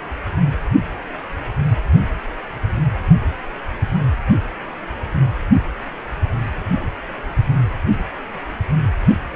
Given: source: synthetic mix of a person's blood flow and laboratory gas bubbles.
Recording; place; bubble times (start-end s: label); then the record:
Doppler ultrasound of blood flow; precordium
no bubbles
From the record:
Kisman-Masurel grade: 000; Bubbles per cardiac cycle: 0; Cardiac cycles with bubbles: 0%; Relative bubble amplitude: no bubbles discernible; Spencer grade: 0 (complete lack of bubble signals)